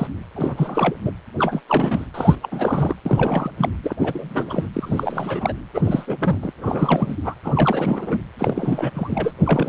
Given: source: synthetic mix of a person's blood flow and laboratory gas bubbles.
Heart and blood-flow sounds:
Doppler ultrasound of blood flow; precordium
0.00-0.07 s: bubbles
0.35-0.95 s: bubbles
1.03-1.11 s: bubbles
1.39-1.61 s: bubbles
1.68-2.06 s: bubbles
2.14-2.35 s: bubbles
2.42-2.96 s: bubbles
3.05-3.51 s: bubbles
3.58-3.69 s: bubbles
3.83-3.96 s: bubbles
3.99-4.67 s: bubbles
4.73-5.53 s: bubbles
5.74-6.38 s: bubbles
6.41-6.53 s: bubbles
6.57-7.17 s: bubbles
7.24-7.34 s: bubbles
7.43-8.20 s: bubbles
8.38-8.91 s: bubbles
8.95-9.33 s: bubbles
9.40-9.69 s: bubbles
From the record:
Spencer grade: 3 (all of the cardiac periods contain showers or single bubble signals, but not dominating or overriding the cardiac motion signals); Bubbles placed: anywhere in the cardiac cycle

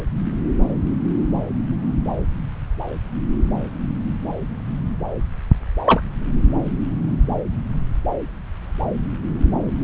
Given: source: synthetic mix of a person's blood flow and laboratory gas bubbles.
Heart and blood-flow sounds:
Doppler ultrasound of blood flow; subclavian vein
5.86-6.01 s: bubbles
From the record:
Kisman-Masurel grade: 113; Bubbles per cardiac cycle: 1 to 2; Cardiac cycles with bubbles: 1 to 10%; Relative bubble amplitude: loud (0.450 to 0.775); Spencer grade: 1 (occasional bubble signal discernible with the cardiac motion signal, with majority of cardiac periods free of bubbles); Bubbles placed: anywhere in the cardiac cycle

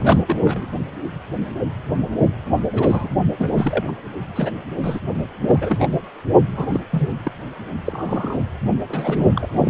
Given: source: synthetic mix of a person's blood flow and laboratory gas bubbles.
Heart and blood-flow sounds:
Doppler ultrasound of blood flow; precordium
0.00-0.24 s: bubbles
0.27-0.41 s: bubbles
0.45-0.70 s: bubbles
2.72-3.08 s: bubbles
3.38-3.50 s: bubbles
3.53-3.84 s: bubbles
3.87-3.92 s: bubbles
4.35-4.50 s: bubbles
4.83-5.00 s: bubbles
5.41-5.87 s: bubbles
6.57-6.81 s: bubbles
6.91-7.16 s: bubbles
7.24-7.32 s: bubbles
7.84-8.39 s: bubbles
8.89-9.29 s: bubbles
9.35-9.70 s: bubbles
From the record:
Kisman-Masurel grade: 232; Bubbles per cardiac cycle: several, 3 to 8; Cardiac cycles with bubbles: 50 to 99%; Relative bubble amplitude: moderate (0.250 to 0.450); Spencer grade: 3 (all of the cardiac periods contain showers or single bubble signals, but not dominating or overriding the cardiac motion signals); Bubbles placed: only in the low amplitude regions of the cardiac cycle

